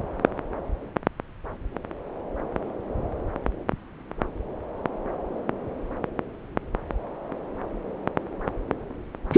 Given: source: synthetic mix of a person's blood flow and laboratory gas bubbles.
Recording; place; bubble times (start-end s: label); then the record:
Doppler ultrasound of blood flow; subclavian vein
9.32-9.38 s: bubbles
From the record:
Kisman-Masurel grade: 113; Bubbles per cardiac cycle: 1 to 2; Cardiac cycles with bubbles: 1 to 10%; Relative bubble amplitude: loud (0.450 to 0.775); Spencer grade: 1 (occasional bubble signal discernible with the cardiac motion signal, with majority of cardiac periods free of bubbles); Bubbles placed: anywhere in the cardiac cycle